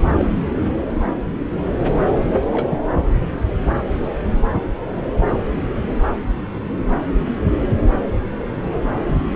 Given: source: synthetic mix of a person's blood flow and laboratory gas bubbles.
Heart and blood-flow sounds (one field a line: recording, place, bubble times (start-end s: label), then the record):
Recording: Doppler ultrasound of blood flow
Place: subclavian vein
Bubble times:
0.19-0.28 s: bubbles
2.52-2.77 s: bubbles
From the record:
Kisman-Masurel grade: 122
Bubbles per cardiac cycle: 1 to 2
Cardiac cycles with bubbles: 10 to 50%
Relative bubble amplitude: moderate (0.250 to 0.450)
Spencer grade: 2 (many but less than half of the cardiac periods contain bubble signals, singularly or in groups)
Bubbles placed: anywhere in the cardiac cycle